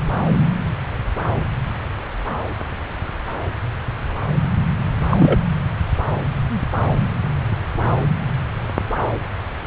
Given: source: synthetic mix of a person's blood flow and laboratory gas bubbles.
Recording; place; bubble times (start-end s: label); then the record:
Doppler ultrasound of blood flow; subclavian vein
5.10-5.39 s: bubbles
From the record:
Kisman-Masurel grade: 213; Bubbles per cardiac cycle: several, 3 to 8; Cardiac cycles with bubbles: 1 to 10%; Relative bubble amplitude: loud (0.450 to 0.775); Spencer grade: 1 (occasional bubble signal discernible with the cardiac motion signal, with majority of cardiac periods free of bubbles); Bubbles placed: anywhere in the cardiac cycle